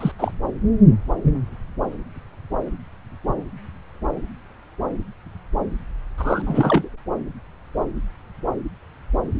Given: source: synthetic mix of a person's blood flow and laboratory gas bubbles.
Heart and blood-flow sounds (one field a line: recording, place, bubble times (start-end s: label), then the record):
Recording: Doppler ultrasound of blood flow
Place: subclavian vein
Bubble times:
0.00-0.11 s: bubbles
0.18-0.32 s: bubbles
6.18-6.89 s: bubbles
From the record:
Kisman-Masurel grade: 222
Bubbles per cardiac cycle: several, 3 to 8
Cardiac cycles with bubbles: 10 to 50%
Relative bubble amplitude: moderate (0.250 to 0.450)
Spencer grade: 2 (many but less than half of the cardiac periods contain bubble signals, singularly or in groups)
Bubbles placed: anywhere in the cardiac cycle